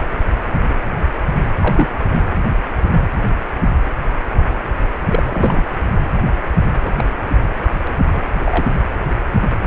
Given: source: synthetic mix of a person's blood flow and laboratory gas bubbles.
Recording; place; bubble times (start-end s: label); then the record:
Doppler ultrasound of blood flow; precordium
1.62-1.89 s: bubbles
5.08-5.23 s: bubbles
5.26-5.64 s: bubbles
6.83-6.92 s: bubbles
6.96-7.05 s: bubbles
8.06-8.12 s: bubbles
8.15-8.20 s: bubbles
8.35-8.67 s: bubbles
From the record:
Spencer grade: 2 (many but less than half of the cardiac periods contain bubble signals, singularly or in groups); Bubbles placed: anywhere in the cardiac cycle